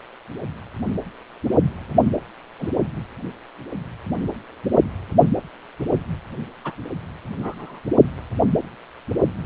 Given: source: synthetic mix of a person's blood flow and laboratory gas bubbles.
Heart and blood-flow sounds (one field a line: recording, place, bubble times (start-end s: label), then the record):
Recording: Doppler ultrasound of blood flow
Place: precordium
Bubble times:
2.58-2.69 s: bubbles
6.64-6.72 s: bubbles
7.42-7.80 s: bubbles
From the record:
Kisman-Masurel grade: 122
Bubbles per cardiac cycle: 1 to 2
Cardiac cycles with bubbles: 10 to 50%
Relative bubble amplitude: moderate (0.250 to 0.450)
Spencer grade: 2 (many but less than half of the cardiac periods contain bubble signals, singularly or in groups)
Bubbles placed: only in the low amplitude regions of the cardiac cycle